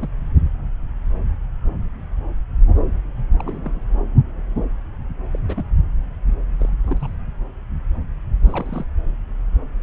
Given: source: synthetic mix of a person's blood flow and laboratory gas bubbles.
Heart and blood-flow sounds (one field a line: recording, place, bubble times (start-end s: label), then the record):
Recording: Doppler ultrasound of blood flow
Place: subclavian vein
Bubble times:
0.00-0.10 s: bubbles
3.38-3.81 s: bubbles
5.31-5.39 s: bubbles
5.48-5.65 s: bubbles
6.60-6.70 s: bubbles
6.84-6.98 s: bubbles
7.00-7.15 s: bubbles
8.46-8.85 s: bubbles
From the record:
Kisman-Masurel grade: 221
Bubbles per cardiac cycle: several, 3 to 8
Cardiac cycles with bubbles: 10 to 50%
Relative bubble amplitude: barely perceptible (0.100 to 0.250)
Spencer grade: 2 (many but less than half of the cardiac periods contain bubble signals, singularly or in groups)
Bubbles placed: anywhere in the cardiac cycle